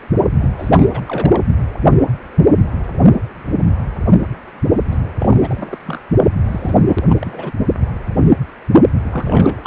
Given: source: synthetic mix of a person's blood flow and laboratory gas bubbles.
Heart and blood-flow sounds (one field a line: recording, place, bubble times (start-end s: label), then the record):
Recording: Doppler ultrasound of blood flow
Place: precordium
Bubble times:
0.32-0.49 s: bubbles
0.58-0.85 s: bubbles
0.91-1.42 s: bubbles
4.91-4.98 s: bubbles
5.20-5.79 s: bubbles
5.85-6.03 s: bubbles
6.51-6.75 s: bubbles
6.87-7.03 s: bubbles
7.08-7.52 s: bubbles
9.11-9.67 s: bubbles
From the record:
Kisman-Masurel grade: 332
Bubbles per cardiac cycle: rolling drumbeat, 9 or more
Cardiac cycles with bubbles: 50 to 99%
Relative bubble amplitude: moderate (0.250 to 0.450)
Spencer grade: 3 (all of the cardiac periods contain showers or single bubble signals, but not dominating or overriding the cardiac motion signals)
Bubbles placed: only in the low amplitude regions of the cardiac cycle